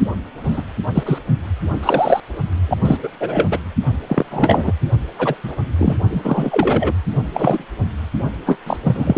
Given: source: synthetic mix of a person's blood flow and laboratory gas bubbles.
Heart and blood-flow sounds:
Doppler ultrasound of blood flow; precordium
0.44-0.62 s: bubbles
0.94-1.19 s: bubbles
1.82-2.20 s: bubbles
2.68-2.77 s: bubbles
2.85-2.99 s: bubbles
3.02-3.09 s: bubbles
3.20-3.59 s: bubbles
4.08-4.25 s: bubbles
4.31-4.72 s: bubbles
5.18-5.35 s: bubbles
5.43-5.55 s: bubbles
5.77-5.96 s: bubbles
6.10-6.93 s: bubbles
7.34-7.65 s: bubbles
8.46-8.58 s: bubbles
8.66-8.77 s: bubbles
8.84-9.18 s: bubbles
From the record:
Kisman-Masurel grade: 243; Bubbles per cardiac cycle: several, 3 to 8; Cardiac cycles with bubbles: 100%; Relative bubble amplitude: loud (0.450 to 0.775); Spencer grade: 3 (all of the cardiac periods contain showers or single bubble signals, but not dominating or overriding the cardiac motion signals); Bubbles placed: only in the low amplitude regions of the cardiac cycle

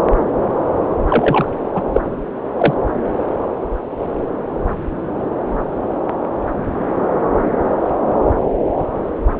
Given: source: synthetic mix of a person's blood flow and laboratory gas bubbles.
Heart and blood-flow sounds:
Doppler ultrasound of blood flow; subclavian vein
1.08-1.51 s: bubbles
1.75-1.81 s: bubbles
1.94-2.01 s: bubbles
2.58-2.74 s: bubbles
From the record:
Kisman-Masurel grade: 123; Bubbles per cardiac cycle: 1 to 2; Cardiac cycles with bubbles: 10 to 50%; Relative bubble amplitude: loud (0.450 to 0.775); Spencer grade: 2 (many but less than half of the cardiac periods contain bubble signals, singularly or in groups); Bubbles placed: anywhere in the cardiac cycle

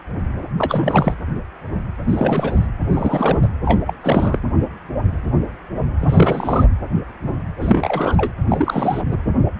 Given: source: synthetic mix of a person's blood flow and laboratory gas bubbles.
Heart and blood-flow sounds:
Doppler ultrasound of blood flow; precordium
0.58-1.14 s: bubbles
2.08-2.67 s: bubbles
2.92-3.48 s: bubbles
3.65-3.82 s: bubbles
3.87-3.94 s: bubbles
4.00-4.39 s: bubbles
6.00-6.68 s: bubbles
7.61-8.32 s: bubbles
8.50-9.02 s: bubbles
9.09-9.18 s: bubbles
From the record:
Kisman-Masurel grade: 333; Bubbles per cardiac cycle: rolling drumbeat, 9 or more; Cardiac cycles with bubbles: 50 to 99%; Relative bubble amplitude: loud (0.450 to 0.775); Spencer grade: 3 (all of the cardiac periods contain showers or single bubble signals, but not dominating or overriding the cardiac motion signals); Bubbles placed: anywhere in the cardiac cycle

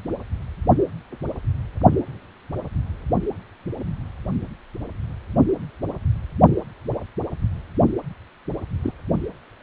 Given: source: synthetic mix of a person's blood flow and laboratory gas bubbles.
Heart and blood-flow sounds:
Doppler ultrasound of blood flow; precordium
8.84-8.92 s: bubbles
From the record:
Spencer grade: 2 (many but less than half of the cardiac periods contain bubble signals, singularly or in groups); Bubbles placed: only in the low amplitude regions of the cardiac cycle

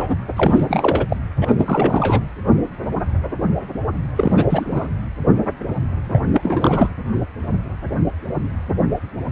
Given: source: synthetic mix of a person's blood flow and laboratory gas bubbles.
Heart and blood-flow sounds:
Doppler ultrasound of blood flow; precordium
0.00-0.15 s: bubbles
0.36-0.65 s: bubbles
0.68-1.06 s: bubbles
1.08-1.17 s: bubbles
1.41-1.55 s: bubbles
1.58-2.22 s: bubbles
4.16-4.46 s: bubbles
4.50-4.88 s: bubbles
6.11-6.25 s: bubbles
6.33-6.91 s: bubbles
From the record:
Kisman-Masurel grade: 332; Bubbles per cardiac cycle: rolling drumbeat, 9 or more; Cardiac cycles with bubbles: 50 to 99%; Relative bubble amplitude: moderate (0.250 to 0.450); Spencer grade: 3 (all of the cardiac periods contain showers or single bubble signals, but not dominating or overriding the cardiac motion signals); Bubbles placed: anywhere in the cardiac cycle

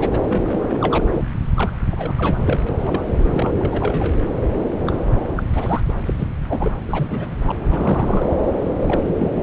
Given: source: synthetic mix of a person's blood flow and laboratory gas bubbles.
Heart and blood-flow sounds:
Doppler ultrasound of blood flow; subclavian vein
0.00-0.25 s: bubbles
0.28-1.06 s: bubbles
1.55-1.72 s: bubbles
1.92-2.39 s: bubbles
2.44-2.60 s: bubbles
2.69-2.77 s: bubbles
2.80-3.51 s: bubbles
3.59-4.13 s: bubbles
4.21-4.28 s: bubbles
4.86-5.03 s: bubbles
5.36-5.43 s: bubbles
5.54-5.81 s: bubbles
5.88-5.93 s: bubbles
6.05-6.14 s: bubbles
6.18-6.27 s: bubbles
6.49-6.71 s: bubbles
6.85-7.26 s: bubbles
7.46-7.52 s: bubbles
7.69-8.32 s: bubbles
8.79-9.32 s: bubbles
9.38-9.43 s: bubbles
From the record:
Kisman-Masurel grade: 342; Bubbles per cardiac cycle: rolling drumbeat, 9 or more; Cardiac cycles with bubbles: 100%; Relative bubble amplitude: moderate (0.250 to 0.450); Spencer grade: 3 (all of the cardiac periods contain showers or single bubble signals, but not dominating or overriding the cardiac motion signals); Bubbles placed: anywhere in the cardiac cycle

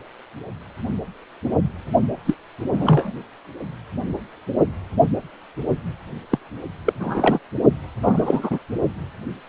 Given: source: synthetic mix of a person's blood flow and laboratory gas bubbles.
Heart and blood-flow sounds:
Doppler ultrasound of blood flow; precordium
2.25-2.35 s: bubbles
2.73-3.12 s: bubbles
6.30-6.39 s: bubbles
6.84-6.93 s: bubbles
7.00-7.38 s: bubbles
8.03-8.59 s: bubbles
From the record:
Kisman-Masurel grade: 223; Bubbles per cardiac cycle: several, 3 to 8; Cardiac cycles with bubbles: 10 to 50%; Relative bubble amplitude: loud (0.450 to 0.775); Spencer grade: 2 (many but less than half of the cardiac periods contain bubble signals, singularly or in groups); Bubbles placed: only in the low amplitude regions of the cardiac cycle

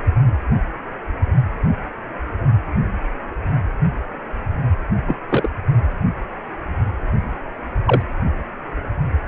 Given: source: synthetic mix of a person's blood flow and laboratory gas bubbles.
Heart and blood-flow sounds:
Doppler ultrasound of blood flow; precordium
5.08-5.19 s: bubbles
5.29-5.49 s: bubbles
7.85-8.02 s: bubbles
From the record:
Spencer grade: 2 (many but less than half of the cardiac periods contain bubble signals, singularly or in groups); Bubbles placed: anywhere in the cardiac cycle

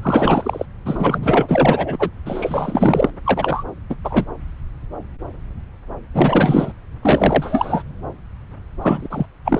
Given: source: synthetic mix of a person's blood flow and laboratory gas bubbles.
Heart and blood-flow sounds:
Doppler ultrasound of blood flow; subclavian vein
0.02-0.66 s: bubbles
0.85-2.10 s: bubbles
2.25-3.10 s: bubbles
3.24-3.63 s: bubbles
3.90-3.95 s: bubbles
4.04-4.25 s: bubbles
6.14-6.72 s: bubbles
7.02-7.83 s: bubbles
8.81-9.07 s: bubbles
9.10-9.25 s: bubbles
9.45-9.60 s: bubbles
From the record:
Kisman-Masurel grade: 333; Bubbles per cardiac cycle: rolling drumbeat, 9 or more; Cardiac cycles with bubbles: 50 to 99%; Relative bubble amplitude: loud (0.450 to 0.775); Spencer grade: 3 (all of the cardiac periods contain showers or single bubble signals, but not dominating or overriding the cardiac motion signals); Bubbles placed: anywhere in the cardiac cycle

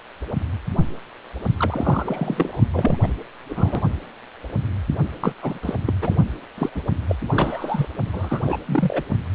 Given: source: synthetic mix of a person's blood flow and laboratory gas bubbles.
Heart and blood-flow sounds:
Doppler ultrasound of blood flow; precordium
1.58-2.60 s: bubbles
2.71-2.96 s: bubbles
3.02-3.06 s: bubbles
3.49-3.80 s: bubbles
5.20-5.33 s: bubbles
5.42-5.58 s: bubbles
5.62-5.75 s: bubbles
5.87-5.94 s: bubbles
6.01-6.15 s: bubbles
6.58-6.70 s: bubbles
6.75-6.82 s: bubbles
7.08-7.16 s: bubbles
7.28-7.88 s: bubbles
8.12-8.41 s: bubbles
8.46-8.57 s: bubbles
8.65-9.02 s: bubbles
From the record:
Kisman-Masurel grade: 232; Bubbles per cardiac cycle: several, 3 to 8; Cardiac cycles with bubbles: 50 to 99%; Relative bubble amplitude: moderate (0.250 to 0.450); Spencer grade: 3 (all of the cardiac periods contain showers or single bubble signals, but not dominating or overriding the cardiac motion signals); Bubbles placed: only in the low amplitude regions of the cardiac cycle

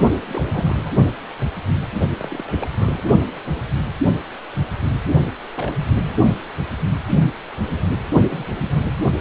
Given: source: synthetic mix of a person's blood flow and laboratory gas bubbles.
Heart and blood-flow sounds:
Doppler ultrasound of blood flow; precordium
0.27-0.95 s: bubbles
2.19-2.68 s: bubbles
2.78-3.04 s: bubbles
5.54-5.75 s: bubbles
5.86-6.15 s: bubbles
8.30-8.45 s: bubbles
8.71-8.86 s: bubbles
9.02-9.08 s: bubbles
From the record:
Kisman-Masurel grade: 221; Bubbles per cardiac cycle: several, 3 to 8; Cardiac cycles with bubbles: 10 to 50%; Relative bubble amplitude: barely perceptible (0.100 to 0.250); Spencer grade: 2 (many but less than half of the cardiac periods contain bubble signals, singularly or in groups); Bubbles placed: only in the low amplitude regions of the cardiac cycle

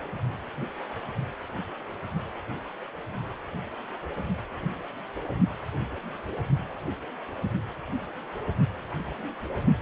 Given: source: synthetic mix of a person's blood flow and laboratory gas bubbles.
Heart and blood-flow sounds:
Doppler ultrasound of blood flow; precordium
no bubbles
From the record:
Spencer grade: 0 (complete lack of bubble signals)

